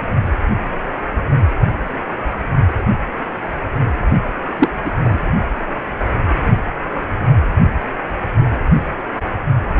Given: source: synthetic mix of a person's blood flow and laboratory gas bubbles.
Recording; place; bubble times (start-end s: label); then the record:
Doppler ultrasound of blood flow; precordium
4.59-4.69 s: bubbles
4.84-4.91 s: bubbles
5.04-5.18 s: bubbles
From the record:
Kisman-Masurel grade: 213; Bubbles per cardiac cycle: several, 3 to 8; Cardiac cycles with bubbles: 1 to 10%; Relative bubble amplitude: loud (0.450 to 0.775); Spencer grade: 1 (occasional bubble signal discernible with the cardiac motion signal, with majority of cardiac periods free of bubbles); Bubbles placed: only in the low amplitude regions of the cardiac cycle